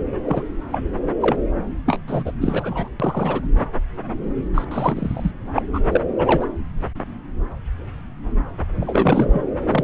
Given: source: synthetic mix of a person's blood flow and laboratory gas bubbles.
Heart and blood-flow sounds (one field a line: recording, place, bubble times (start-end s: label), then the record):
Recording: Doppler ultrasound of blood flow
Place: subclavian vein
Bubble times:
0.24-0.43 s: bubbles
0.72-0.78 s: bubbles
1.20-1.36 s: bubbles
1.85-1.97 s: bubbles
2.07-2.33 s: bubbles
2.41-2.89 s: bubbles
3.00-3.42 s: bubbles
4.54-4.64 s: bubbles
4.71-5.31 s: bubbles
5.55-5.62 s: bubbles
5.73-5.80 s: bubbles
5.92-6.01 s: bubbles
6.18-6.47 s: bubbles
8.80-9.45 s: bubbles
9.70-9.84 s: bubbles
From the record:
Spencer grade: 3 (all of the cardiac periods contain showers or single bubble signals, but not dominating or overriding the cardiac motion signals)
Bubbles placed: anywhere in the cardiac cycle